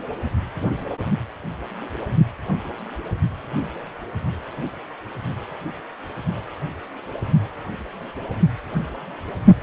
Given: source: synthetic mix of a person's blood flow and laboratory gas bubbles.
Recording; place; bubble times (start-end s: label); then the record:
Doppler ultrasound of blood flow; precordium
no bubbles
From the record:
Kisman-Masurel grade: 000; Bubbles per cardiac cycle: 0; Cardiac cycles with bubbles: 0%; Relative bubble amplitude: no bubbles discernible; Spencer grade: 0 (complete lack of bubble signals)